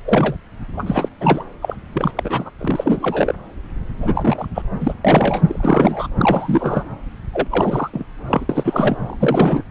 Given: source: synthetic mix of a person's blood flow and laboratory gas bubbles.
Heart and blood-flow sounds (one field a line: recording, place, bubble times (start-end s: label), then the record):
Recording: Doppler ultrasound of blood flow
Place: subclavian vein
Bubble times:
0.04-0.36 s: bubbles
0.77-1.08 s: bubbles
1.20-1.45 s: bubbles
1.61-1.76 s: bubbles
1.94-2.12 s: bubbles
2.17-2.50 s: bubbles
2.59-3.35 s: bubbles
4.00-4.47 s: bubbles
4.54-4.62 s: bubbles
4.81-4.94 s: bubbles
5.04-5.42 s: bubbles
5.46-6.08 s: bubbles
6.17-6.84 s: bubbles
7.33-7.48 s: bubbles
7.50-7.90 s: bubbles
7.93-8.04 s: bubbles
8.27-8.46 s: bubbles
8.49-8.97 s: bubbles
9.05-9.62 s: bubbles
From the record:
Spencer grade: 3 (all of the cardiac periods contain showers or single bubble signals, but not dominating or overriding the cardiac motion signals)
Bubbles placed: anywhere in the cardiac cycle